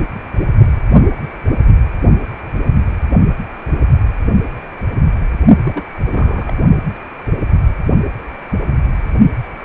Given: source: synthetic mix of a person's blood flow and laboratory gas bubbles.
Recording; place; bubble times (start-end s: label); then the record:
Doppler ultrasound of blood flow; precordium
5.65-5.83 s: bubbles
6.07-6.57 s: bubbles
From the record:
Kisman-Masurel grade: 211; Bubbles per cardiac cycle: several, 3 to 8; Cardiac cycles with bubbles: 1 to 10%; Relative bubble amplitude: barely perceptible (0.100 to 0.250); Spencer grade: 1 (occasional bubble signal discernible with the cardiac motion signal, with majority of cardiac periods free of bubbles); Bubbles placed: only in the low amplitude regions of the cardiac cycle